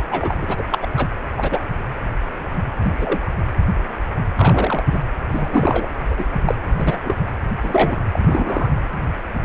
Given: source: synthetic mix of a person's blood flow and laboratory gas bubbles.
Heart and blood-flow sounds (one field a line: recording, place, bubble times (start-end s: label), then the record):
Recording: Doppler ultrasound of blood flow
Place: precordium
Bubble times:
0.00-0.02 s: bubbles
0.10-0.36 s: bubbles
0.40-0.45 s: bubbles
0.48-0.64 s: bubbles
0.71-0.78 s: bubbles
0.81-0.87 s: bubbles
0.97-1.08 s: bubbles
1.36-1.60 s: bubbles
2.84-3.35 s: bubbles
4.36-4.83 s: bubbles
4.90-5.00 s: bubbles
5.30-5.87 s: bubbles
6.10-6.25 s: bubbles
6.46-6.54 s: bubbles
6.78-6.97 s: bubbles
7.04-7.17 s: bubbles
7.62-7.98 s: bubbles
8.12-8.70 s: bubbles
From the record:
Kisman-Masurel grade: 233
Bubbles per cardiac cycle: several, 3 to 8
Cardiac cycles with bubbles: 50 to 99%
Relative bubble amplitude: loud (0.450 to 0.775)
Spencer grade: 3 (all of the cardiac periods contain showers or single bubble signals, but not dominating or overriding the cardiac motion signals)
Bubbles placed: anywhere in the cardiac cycle